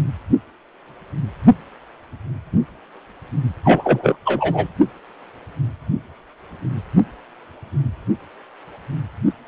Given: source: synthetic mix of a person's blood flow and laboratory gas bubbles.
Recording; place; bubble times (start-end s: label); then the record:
Doppler ultrasound of blood flow; precordium
3.63-4.16 s: bubbles
4.25-4.69 s: bubbles
From the record:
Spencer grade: 1 (occasional bubble signal discernible with the cardiac motion signal, with majority of cardiac periods free of bubbles); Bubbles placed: only in the low amplitude regions of the cardiac cycle